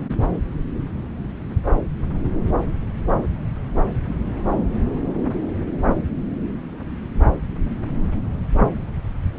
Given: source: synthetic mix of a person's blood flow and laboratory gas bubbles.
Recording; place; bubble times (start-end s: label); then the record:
Doppler ultrasound of blood flow; subclavian vein
no bubbles
From the record:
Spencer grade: 0 (complete lack of bubble signals)